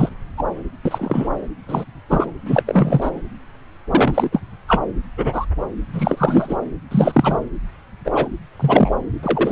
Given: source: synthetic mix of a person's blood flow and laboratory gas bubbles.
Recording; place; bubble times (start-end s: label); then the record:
Doppler ultrasound of blood flow; subclavian vein
0.00-0.09 s: bubbles
0.37-0.44 s: bubbles
0.85-1.29 s: bubbles
1.68-1.85 s: bubbles
2.10-2.26 s: bubbles
2.46-2.62 s: bubbles
2.66-3.11 s: bubbles
3.90-4.40 s: bubbles
4.68-4.82 s: bubbles
5.17-5.45 s: bubbles
5.93-6.57 s: bubbles
6.91-7.37 s: bubbles
8.04-8.29 s: bubbles
8.59-8.96 s: bubbles
9.23-9.52 s: bubbles
From the record:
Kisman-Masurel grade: 243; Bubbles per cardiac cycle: several, 3 to 8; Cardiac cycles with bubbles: 100%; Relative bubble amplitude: loud (0.450 to 0.775); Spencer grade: 3 (all of the cardiac periods contain showers or single bubble signals, but not dominating or overriding the cardiac motion signals); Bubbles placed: anywhere in the cardiac cycle